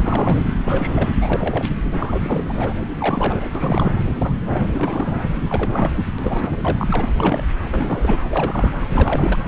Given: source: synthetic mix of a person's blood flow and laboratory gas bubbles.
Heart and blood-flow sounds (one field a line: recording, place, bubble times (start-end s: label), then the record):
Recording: Doppler ultrasound of blood flow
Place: subclavian vein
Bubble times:
0.00-0.46 s: bubbles
0.65-1.12 s: bubbles
1.20-1.69 s: bubbles
1.94-2.73 s: bubbles
3.00-3.50 s: bubbles
3.55-3.92 s: bubbles
4.16-4.34 s: bubbles
4.45-4.67 s: bubbles
4.71-5.17 s: bubbles
5.42-5.91 s: bubbles
5.95-6.04 s: bubbles
6.18-6.56 s: bubbles
6.62-7.08 s: bubbles
7.17-7.44 s: bubbles
7.71-8.22 s: bubbles
8.30-8.75 s: bubbles
8.88-9.38 s: bubbles
From the record:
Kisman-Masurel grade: 342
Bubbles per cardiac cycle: rolling drumbeat, 9 or more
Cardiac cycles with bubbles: 100%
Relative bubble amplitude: moderate (0.250 to 0.450)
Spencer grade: 3 (all of the cardiac periods contain showers or single bubble signals, but not dominating or overriding the cardiac motion signals)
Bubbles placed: anywhere in the cardiac cycle